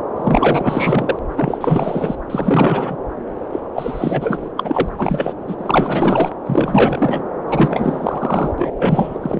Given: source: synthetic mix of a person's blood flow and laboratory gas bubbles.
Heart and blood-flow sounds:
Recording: Doppler ultrasound of blood flow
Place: subclavian vein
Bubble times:
0.16-1.19 s: bubbles
1.36-1.58 s: bubbles
1.60-2.15 s: bubbles
2.29-2.96 s: bubbles
3.52-3.60 s: bubbles
3.73-4.49 s: bubbles
4.56-4.88 s: bubbles
4.97-5.34 s: bubbles
5.47-6.32 s: bubbles
6.45-7.23 s: bubbles
7.47-8.53 s: bubbles
8.58-8.71 s: bubbles
8.77-9.40 s: bubbles
From the record:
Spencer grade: 4 (maximum detectable bubble signal sounding continuously throughout systole and diastole of every cardiac period, and overriding the amplitude of the normal cardiac signals)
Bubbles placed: anywhere in the cardiac cycle

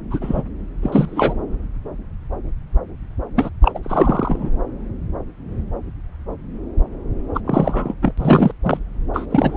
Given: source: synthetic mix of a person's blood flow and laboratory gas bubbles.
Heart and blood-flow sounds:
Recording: Doppler ultrasound of blood flow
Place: subclavian vein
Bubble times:
0.10-0.43 s: bubbles
0.82-1.34 s: bubbles
3.36-3.50 s: bubbles
3.61-3.72 s: bubbles
3.75-3.79 s: bubbles
3.83-4.51 s: bubbles
7.34-7.41 s: bubbles
7.45-7.95 s: bubbles
8.02-8.13 s: bubbles
8.18-8.52 s: bubbles
8.62-8.79 s: bubbles
9.14-9.26 s: bubbles
9.30-9.57 s: bubbles
From the record:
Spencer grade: 3 (all of the cardiac periods contain showers or single bubble signals, but not dominating or overriding the cardiac motion signals)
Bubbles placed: anywhere in the cardiac cycle

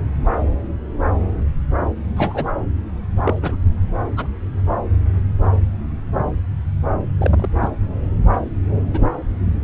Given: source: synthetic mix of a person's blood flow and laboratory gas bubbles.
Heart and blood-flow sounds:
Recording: Doppler ultrasound of blood flow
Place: subclavian vein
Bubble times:
2.17-2.52 s: bubbles
3.25-3.34 s: bubbles
3.42-3.58 s: bubbles
4.17-4.26 s: bubbles
7.18-7.47 s: bubbles
7.62-7.68 s: bubbles
8.93-9.08 s: bubbles
From the record:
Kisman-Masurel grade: 122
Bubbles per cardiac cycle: 1 to 2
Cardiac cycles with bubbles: 10 to 50%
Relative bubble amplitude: moderate (0.250 to 0.450)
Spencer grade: 2 (many but less than half of the cardiac periods contain bubble signals, singularly or in groups)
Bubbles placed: anywhere in the cardiac cycle

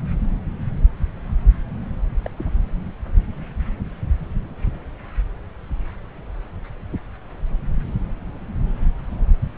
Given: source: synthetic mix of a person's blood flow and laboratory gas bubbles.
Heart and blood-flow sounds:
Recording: Doppler ultrasound of blood flow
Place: subclavian vein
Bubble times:
2.24-2.31 s: bubbles
2.37-2.50 s: bubbles
From the record:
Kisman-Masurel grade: 211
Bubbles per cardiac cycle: several, 3 to 8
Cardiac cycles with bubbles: 1 to 10%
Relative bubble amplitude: barely perceptible (0.100 to 0.250)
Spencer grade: 1 (occasional bubble signal discernible with the cardiac motion signal, with majority of cardiac periods free of bubbles)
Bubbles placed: anywhere in the cardiac cycle

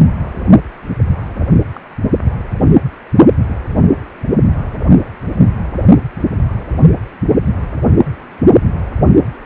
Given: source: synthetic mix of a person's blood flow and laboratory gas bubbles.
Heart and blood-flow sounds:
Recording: Doppler ultrasound of blood flow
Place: precordium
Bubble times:
1.75-1.80 s: bubbles
From the record:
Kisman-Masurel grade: 111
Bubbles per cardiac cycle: 1 to 2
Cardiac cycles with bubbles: 1 to 10%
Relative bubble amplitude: barely perceptible (0.100 to 0.250)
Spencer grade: 1 (occasional bubble signal discernible with the cardiac motion signal, with majority of cardiac periods free of bubbles)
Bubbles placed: only in the low amplitude regions of the cardiac cycle

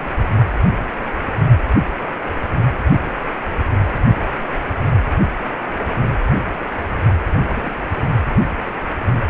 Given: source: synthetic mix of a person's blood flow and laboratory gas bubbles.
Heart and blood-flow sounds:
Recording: Doppler ultrasound of blood flow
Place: precordium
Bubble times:
7.25-7.43 s: bubbles
7.47-7.91 s: bubbles
From the record:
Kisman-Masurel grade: 211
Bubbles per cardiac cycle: several, 3 to 8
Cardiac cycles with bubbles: 1 to 10%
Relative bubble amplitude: barely perceptible (0.100 to 0.250)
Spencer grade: 1 (occasional bubble signal discernible with the cardiac motion signal, with majority of cardiac periods free of bubbles)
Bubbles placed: anywhere in the cardiac cycle

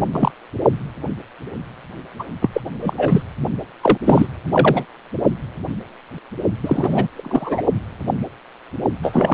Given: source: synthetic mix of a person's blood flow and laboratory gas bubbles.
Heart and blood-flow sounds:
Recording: Doppler ultrasound of blood flow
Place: precordium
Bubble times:
0.12-0.31 s: bubbles
2.19-2.24 s: bubbles
2.41-2.49 s: bubbles
2.52-2.61 s: bubbles
2.81-2.94 s: bubbles
2.96-3.23 s: bubbles
3.81-3.98 s: bubbles
4.05-4.27 s: bubbles
4.47-4.86 s: bubbles
6.63-7.08 s: bubbles
7.14-7.62 s: bubbles
9.02-9.34 s: bubbles
From the record:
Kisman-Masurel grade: 333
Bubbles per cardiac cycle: rolling drumbeat, 9 or more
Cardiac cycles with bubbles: 50 to 99%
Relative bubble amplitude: loud (0.450 to 0.775)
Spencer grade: 3 (all of the cardiac periods contain showers or single bubble signals, but not dominating or overriding the cardiac motion signals)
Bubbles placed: only in the low amplitude regions of the cardiac cycle

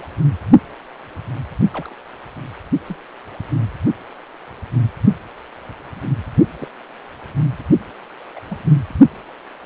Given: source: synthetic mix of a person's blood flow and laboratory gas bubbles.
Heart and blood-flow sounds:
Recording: Doppler ultrasound of blood flow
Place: precordium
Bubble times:
1.73-1.94 s: bubbles
2.88-2.96 s: bubbles
6.58-6.67 s: bubbles
8.36-8.40 s: bubbles
8.50-8.58 s: bubbles
From the record:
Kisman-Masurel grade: 121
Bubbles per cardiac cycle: 1 to 2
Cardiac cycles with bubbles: 10 to 50%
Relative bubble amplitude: barely perceptible (0.100 to 0.250)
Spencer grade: 2 (many but less than half of the cardiac periods contain bubble signals, singularly or in groups)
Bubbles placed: only in the low amplitude regions of the cardiac cycle

